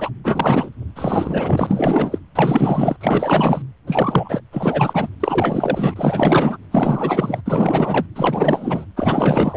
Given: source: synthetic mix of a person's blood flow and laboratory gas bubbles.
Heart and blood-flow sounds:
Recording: Doppler ultrasound of blood flow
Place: precordium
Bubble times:
0.00-0.10 s: bubbles
0.23-0.70 s: bubbles
0.95-2.19 s: bubbles
2.35-2.97 s: bubbles
3.01-3.62 s: bubbles
3.87-4.40 s: bubbles
4.52-5.08 s: bubbles
5.20-6.58 s: bubbles
6.71-7.42 s: bubbles
7.46-8.06 s: bubbles
8.15-8.85 s: bubbles
8.96-9.57 s: bubbles
From the record:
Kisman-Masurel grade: 444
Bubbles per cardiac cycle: continuous sound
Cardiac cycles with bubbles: 100%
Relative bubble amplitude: maximal (0.775 to 0.999)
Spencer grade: 4 (maximum detectable bubble signal sounding continuously throughout systole and diastole of every cardiac period, and overriding the amplitude of the normal cardiac signals)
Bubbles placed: anywhere in the cardiac cycle

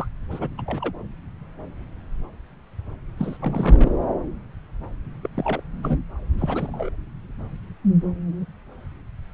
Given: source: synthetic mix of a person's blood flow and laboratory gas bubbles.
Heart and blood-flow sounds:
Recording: Doppler ultrasound of blood flow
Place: subclavian vein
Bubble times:
0.00-0.07 s: bubbles
0.31-0.49 s: bubbles
0.57-0.61 s: bubbles
0.66-0.92 s: bubbles
3.17-3.91 s: bubbles
5.23-5.28 s: bubbles
5.36-5.62 s: bubbles
5.82-5.97 s: bubbles
6.38-6.90 s: bubbles
From the record:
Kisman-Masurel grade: 221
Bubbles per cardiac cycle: several, 3 to 8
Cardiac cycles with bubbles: 10 to 50%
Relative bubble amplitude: barely perceptible (0.100 to 0.250)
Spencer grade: 2 (many but less than half of the cardiac periods contain bubble signals, singularly or in groups)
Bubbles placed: anywhere in the cardiac cycle

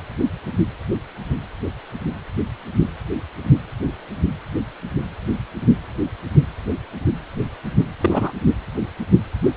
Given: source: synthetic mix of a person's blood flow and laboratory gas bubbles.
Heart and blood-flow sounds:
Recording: Doppler ultrasound of blood flow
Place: precordium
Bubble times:
8.00-8.31 s: bubbles
From the record:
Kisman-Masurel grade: 112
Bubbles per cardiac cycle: 1 to 2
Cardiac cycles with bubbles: 1 to 10%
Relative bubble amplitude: moderate (0.250 to 0.450)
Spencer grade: 1 (occasional bubble signal discernible with the cardiac motion signal, with majority of cardiac periods free of bubbles)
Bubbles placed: anywhere in the cardiac cycle

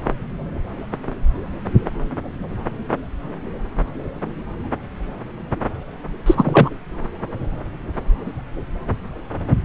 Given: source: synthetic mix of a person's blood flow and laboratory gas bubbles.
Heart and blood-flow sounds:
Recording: Doppler ultrasound of blood flow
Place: subclavian vein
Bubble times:
6.26-6.69 s: bubbles
From the record:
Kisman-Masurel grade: 213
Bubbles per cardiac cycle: several, 3 to 8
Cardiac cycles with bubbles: 1 to 10%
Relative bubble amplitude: loud (0.450 to 0.775)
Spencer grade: 1 (occasional bubble signal discernible with the cardiac motion signal, with majority of cardiac periods free of bubbles)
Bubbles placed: anywhere in the cardiac cycle

